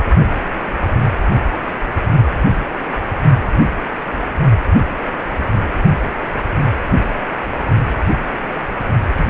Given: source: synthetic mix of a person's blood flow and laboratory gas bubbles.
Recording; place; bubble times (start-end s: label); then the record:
Doppler ultrasound of blood flow; precordium
9.17-9.30 s: bubbles
From the record:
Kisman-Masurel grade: 211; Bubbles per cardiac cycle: several, 3 to 8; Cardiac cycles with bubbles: 1 to 10%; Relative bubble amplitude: barely perceptible (0.100 to 0.250); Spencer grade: 1 (occasional bubble signal discernible with the cardiac motion signal, with majority of cardiac periods free of bubbles); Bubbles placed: only in the low amplitude regions of the cardiac cycle